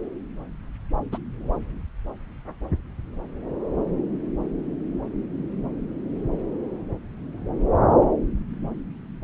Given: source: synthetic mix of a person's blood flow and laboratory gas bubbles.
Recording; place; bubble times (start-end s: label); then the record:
Doppler ultrasound of blood flow; subclavian vein
1.12-1.18 s: bubbles
From the record:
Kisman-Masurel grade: 112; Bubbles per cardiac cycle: 1 to 2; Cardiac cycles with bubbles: 1 to 10%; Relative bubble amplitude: moderate (0.250 to 0.450); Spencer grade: 1 (occasional bubble signal discernible with the cardiac motion signal, with majority of cardiac periods free of bubbles); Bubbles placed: anywhere in the cardiac cycle